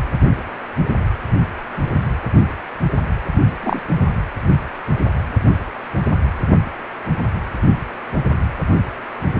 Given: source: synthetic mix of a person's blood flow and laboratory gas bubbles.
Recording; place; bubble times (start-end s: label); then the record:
Doppler ultrasound of blood flow; precordium
3.62-3.79 s: bubbles
From the record:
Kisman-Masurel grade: 113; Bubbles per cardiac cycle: 1 to 2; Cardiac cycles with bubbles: 1 to 10%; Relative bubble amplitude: loud (0.450 to 0.775); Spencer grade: 1 (occasional bubble signal discernible with the cardiac motion signal, with majority of cardiac periods free of bubbles); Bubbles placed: anywhere in the cardiac cycle